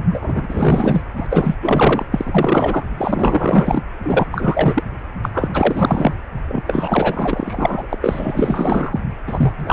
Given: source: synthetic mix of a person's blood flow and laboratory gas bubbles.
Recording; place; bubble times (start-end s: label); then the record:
Doppler ultrasound of blood flow; precordium
0.11-1.03 s: bubbles
1.16-1.27 s: bubbles
1.29-1.56 s: bubbles
1.62-2.05 s: bubbles
2.11-2.84 s: bubbles
2.97-3.81 s: bubbles
4.03-4.28 s: bubbles
4.32-4.83 s: bubbles
5.22-5.29 s: bubbles
5.33-5.49 s: bubbles
5.54-6.14 s: bubbles
6.48-6.64 s: bubbles
6.67-7.98 s: bubbles
8.01-9.00 s: bubbles
9.26-9.54 s: bubbles
9.57-9.73 s: bubbles
From the record:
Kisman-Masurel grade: 444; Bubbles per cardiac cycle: continuous sound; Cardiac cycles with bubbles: 100%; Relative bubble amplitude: maximal (0.775 to 0.999); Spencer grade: 4 (maximum detectable bubble signal sounding continuously throughout systole and diastole of every cardiac period, and overriding the amplitude of the normal cardiac signals); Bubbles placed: anywhere in the cardiac cycle